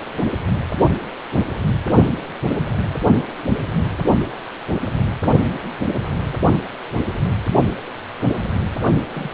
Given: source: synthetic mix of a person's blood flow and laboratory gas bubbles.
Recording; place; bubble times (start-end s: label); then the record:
Doppler ultrasound of blood flow; precordium
9.12-9.30 s: bubbles
From the record:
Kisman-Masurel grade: 111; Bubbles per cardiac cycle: 1 to 2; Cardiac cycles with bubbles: 1 to 10%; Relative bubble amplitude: barely perceptible (0.100 to 0.250); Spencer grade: 1 (occasional bubble signal discernible with the cardiac motion signal, with majority of cardiac periods free of bubbles); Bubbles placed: only in the low amplitude regions of the cardiac cycle